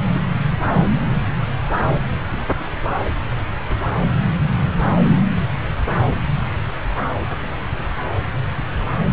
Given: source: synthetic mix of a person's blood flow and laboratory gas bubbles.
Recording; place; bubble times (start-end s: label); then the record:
Doppler ultrasound of blood flow; subclavian vein
no bubbles
From the record:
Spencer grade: 0 (complete lack of bubble signals)